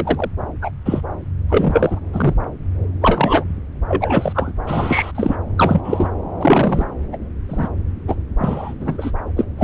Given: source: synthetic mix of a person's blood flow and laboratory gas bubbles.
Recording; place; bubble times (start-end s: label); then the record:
Doppler ultrasound of blood flow; subclavian vein
0.00-0.30 s: bubbles
0.61-0.72 s: bubbles
0.85-1.01 s: bubbles
1.48-1.99 s: bubbles
2.12-2.35 s: bubbles
3.01-3.45 s: bubbles
3.88-4.52 s: bubbles
4.67-5.11 s: bubbles
5.14-5.36 s: bubbles
5.57-5.81 s: bubbles
5.84-6.08 s: bubbles
6.40-6.85 s: bubbles
7.12-7.17 s: bubbles
7.49-7.68 s: bubbles
8.07-8.15 s: bubbles
8.38-8.74 s: bubbles
8.80-9.11 s: bubbles
9.36-9.46 s: bubbles
9.57-9.64 s: bubbles
From the record:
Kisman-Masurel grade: 233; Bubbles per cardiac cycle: several, 3 to 8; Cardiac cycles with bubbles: 50 to 99%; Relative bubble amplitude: loud (0.450 to 0.775); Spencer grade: 3 (all of the cardiac periods contain showers or single bubble signals, but not dominating or overriding the cardiac motion signals); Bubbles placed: anywhere in the cardiac cycle